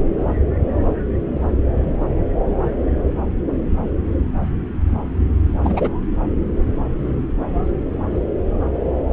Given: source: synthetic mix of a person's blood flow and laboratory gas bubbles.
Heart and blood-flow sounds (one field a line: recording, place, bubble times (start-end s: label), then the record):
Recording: Doppler ultrasound of blood flow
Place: subclavian vein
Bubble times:
5.63-5.90 s: bubbles
From the record:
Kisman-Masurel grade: 113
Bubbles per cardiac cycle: 1 to 2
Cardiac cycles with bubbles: 1 to 10%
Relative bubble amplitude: loud (0.450 to 0.775)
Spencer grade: 1 (occasional bubble signal discernible with the cardiac motion signal, with majority of cardiac periods free of bubbles)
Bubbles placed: anywhere in the cardiac cycle